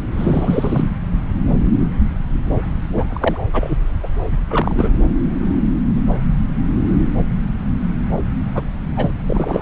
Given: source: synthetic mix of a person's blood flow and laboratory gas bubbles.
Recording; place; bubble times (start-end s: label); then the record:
Doppler ultrasound of blood flow; subclavian vein
0.13-0.89 s: bubbles
2.92-3.04 s: bubbles
3.08-3.40 s: bubbles
3.53-3.76 s: bubbles
4.03-4.08 s: bubbles
4.31-4.38 s: bubbles
4.50-4.89 s: bubbles
8.54-8.62 s: bubbles
8.96-9.11 s: bubbles
9.27-9.62 s: bubbles
From the record:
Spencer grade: 3 (all of the cardiac periods contain showers or single bubble signals, but not dominating or overriding the cardiac motion signals); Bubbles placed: anywhere in the cardiac cycle